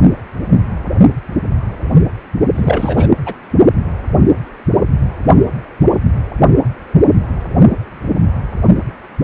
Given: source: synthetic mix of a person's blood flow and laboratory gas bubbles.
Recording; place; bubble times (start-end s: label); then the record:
Doppler ultrasound of blood flow; precordium
2.54-3.07 s: bubbles
3.25-3.33 s: bubbles
From the record:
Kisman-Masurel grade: 213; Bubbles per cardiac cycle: several, 3 to 8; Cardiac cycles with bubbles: 1 to 10%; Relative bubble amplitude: loud (0.450 to 0.775); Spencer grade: 1 (occasional bubble signal discernible with the cardiac motion signal, with majority of cardiac periods free of bubbles); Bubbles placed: only in the low amplitude regions of the cardiac cycle